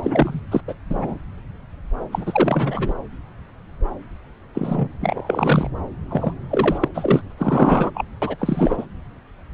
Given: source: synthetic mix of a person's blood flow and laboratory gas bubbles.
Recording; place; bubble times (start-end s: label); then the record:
Doppler ultrasound of blood flow; subclavian vein
0.03-0.40 s: bubbles
0.51-0.61 s: bubbles
0.68-0.74 s: bubbles
0.90-1.18 s: bubbles
2.12-2.94 s: bubbles
4.54-4.88 s: bubbles
5.00-5.71 s: bubbles
6.08-6.33 s: bubbles
6.50-6.88 s: bubbles
6.94-7.23 s: bubbles
7.30-7.32 s: bubbles
7.38-7.91 s: bubbles
7.94-8.05 s: bubbles
8.21-8.36 s: bubbles
8.39-8.86 s: bubbles
From the record:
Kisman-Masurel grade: 333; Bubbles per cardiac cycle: rolling drumbeat, 9 or more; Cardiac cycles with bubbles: 50 to 99%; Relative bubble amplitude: loud (0.450 to 0.775); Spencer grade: 3 (all of the cardiac periods contain showers or single bubble signals, but not dominating or overriding the cardiac motion signals); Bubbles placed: anywhere in the cardiac cycle